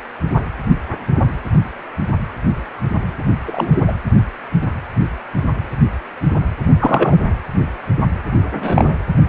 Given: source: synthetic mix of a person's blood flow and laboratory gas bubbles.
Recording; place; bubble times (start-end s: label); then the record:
Doppler ultrasound of blood flow; precordium
3.46-3.93 s: bubbles
6.80-7.18 s: bubbles
8.54-8.96 s: bubbles
From the record:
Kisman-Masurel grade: 123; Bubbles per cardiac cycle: 1 to 2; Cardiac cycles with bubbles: 10 to 50%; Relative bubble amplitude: loud (0.450 to 0.775); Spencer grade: 2 (many but less than half of the cardiac periods contain bubble signals, singularly or in groups); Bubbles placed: anywhere in the cardiac cycle